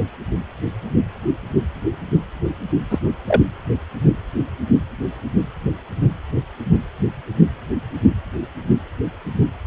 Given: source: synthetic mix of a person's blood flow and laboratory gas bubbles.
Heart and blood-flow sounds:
Doppler ultrasound of blood flow; precordium
2.90-2.99 s: bubbles
3.27-3.41 s: bubbles
From the record:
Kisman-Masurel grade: 113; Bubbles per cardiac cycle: 1 to 2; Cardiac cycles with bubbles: 1 to 10%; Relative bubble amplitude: loud (0.450 to 0.775); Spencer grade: 1 (occasional bubble signal discernible with the cardiac motion signal, with majority of cardiac periods free of bubbles); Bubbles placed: anywhere in the cardiac cycle

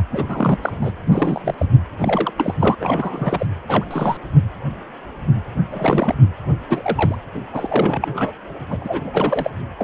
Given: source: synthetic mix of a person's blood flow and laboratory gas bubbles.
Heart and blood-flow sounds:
Doppler ultrasound of blood flow; precordium
0.00-0.03 s: bubbles
0.10-0.57 s: bubbles
0.61-0.72 s: bubbles
0.81-0.91 s: bubbles
1.05-1.54 s: bubbles
1.57-1.65 s: bubbles
1.99-2.33 s: bubbles
2.37-2.55 s: bubbles
2.59-2.75 s: bubbles
2.80-3.47 s: bubbles
3.68-3.85 s: bubbles
3.90-4.17 s: bubbles
5.71-6.15 s: bubbles
6.69-7.16 s: bubbles
7.34-7.40 s: bubbles
7.53-8.32 s: bubbles
8.69-8.77 s: bubbles
8.80-9.50 s: bubbles
9.79-9.84 s: bubbles
From the record:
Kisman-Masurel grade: 332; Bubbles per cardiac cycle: rolling drumbeat, 9 or more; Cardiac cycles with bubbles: 50 to 99%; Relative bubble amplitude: moderate (0.250 to 0.450); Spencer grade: 3 (all of the cardiac periods contain showers or single bubble signals, but not dominating or overriding the cardiac motion signals); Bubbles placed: anywhere in the cardiac cycle

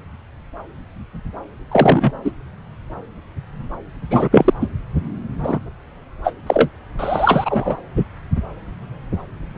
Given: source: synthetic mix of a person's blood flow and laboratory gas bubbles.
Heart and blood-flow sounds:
Doppler ultrasound of blood flow; subclavian vein
1.71-2.11 s: bubbles
2.25-2.31 s: bubbles
4.10-4.29 s: bubbles
4.31-4.54 s: bubbles
4.60-4.67 s: bubbles
5.43-5.59 s: bubbles
6.24-6.31 s: bubbles
6.46-6.69 s: bubbles
6.99-7.77 s: bubbles
7.96-8.04 s: bubbles
From the record:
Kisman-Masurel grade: 223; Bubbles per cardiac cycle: several, 3 to 8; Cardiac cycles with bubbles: 10 to 50%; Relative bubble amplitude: loud (0.450 to 0.775); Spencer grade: 2 (many but less than half of the cardiac periods contain bubble signals, singularly or in groups); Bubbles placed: anywhere in the cardiac cycle

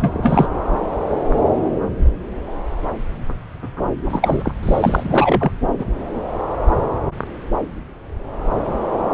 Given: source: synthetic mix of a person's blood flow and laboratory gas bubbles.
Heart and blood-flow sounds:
Doppler ultrasound of blood flow; subclavian vein
0.00-0.48 s: bubbles
4.09-4.51 s: bubbles
4.63-5.51 s: bubbles
5.79-5.86 s: bubbles
From the record:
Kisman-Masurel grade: 223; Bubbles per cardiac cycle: several, 3 to 8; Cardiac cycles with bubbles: 10 to 50%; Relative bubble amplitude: loud (0.450 to 0.775); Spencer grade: 2 (many but less than half of the cardiac periods contain bubble signals, singularly or in groups); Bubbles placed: anywhere in the cardiac cycle

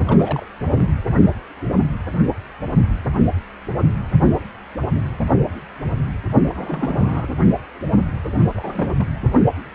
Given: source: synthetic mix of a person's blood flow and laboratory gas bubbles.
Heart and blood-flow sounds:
Doppler ultrasound of blood flow; precordium
0.07-0.46 s: bubbles
0.67-0.86 s: bubbles
6.54-7.29 s: bubbles
8.54-8.94 s: bubbles
8.97-9.04 s: bubbles
From the record:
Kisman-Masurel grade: 221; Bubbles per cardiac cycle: several, 3 to 8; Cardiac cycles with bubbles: 10 to 50%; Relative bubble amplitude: barely perceptible (0.100 to 0.250); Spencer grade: 2 (many but less than half of the cardiac periods contain bubble signals, singularly or in groups); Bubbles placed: anywhere in the cardiac cycle

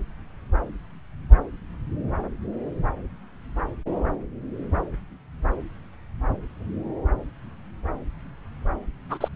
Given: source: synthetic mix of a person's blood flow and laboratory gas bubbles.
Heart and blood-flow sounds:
Doppler ultrasound of blood flow; subclavian vein
9.10-9.18 s: bubbles
9.21-9.28 s: bubbles
From the record:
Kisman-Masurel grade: 212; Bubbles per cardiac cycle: several, 3 to 8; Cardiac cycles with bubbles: 1 to 10%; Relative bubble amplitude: moderate (0.250 to 0.450); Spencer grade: 1 (occasional bubble signal discernible with the cardiac motion signal, with majority of cardiac periods free of bubbles); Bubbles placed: anywhere in the cardiac cycle

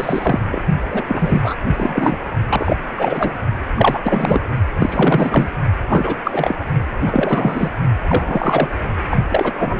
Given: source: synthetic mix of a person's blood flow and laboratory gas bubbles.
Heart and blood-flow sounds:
Doppler ultrasound of blood flow; precordium
0.00-0.40 s: bubbles
0.51-0.63 s: bubbles
0.90-1.02 s: bubbles
1.08-1.54 s: bubbles
1.68-2.18 s: bubbles
2.49-2.77 s: bubbles
2.96-3.34 s: bubbles
3.76-4.00 s: bubbles
4.04-4.44 s: bubbles
4.77-5.51 s: bubbles
5.88-6.19 s: bubbles
6.24-6.54 s: bubbles
7.05-7.70 s: bubbles
8.07-8.69 s: bubbles
9.09-9.17 s: bubbles
9.29-9.53 s: bubbles
9.59-9.80 s: bubbles
From the record:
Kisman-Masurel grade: 343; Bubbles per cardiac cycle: rolling drumbeat, 9 or more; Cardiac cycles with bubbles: 100%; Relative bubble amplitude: loud (0.450 to 0.775); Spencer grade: 3 (all of the cardiac periods contain showers or single bubble signals, but not dominating or overriding the cardiac motion signals); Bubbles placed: only in the low amplitude regions of the cardiac cycle

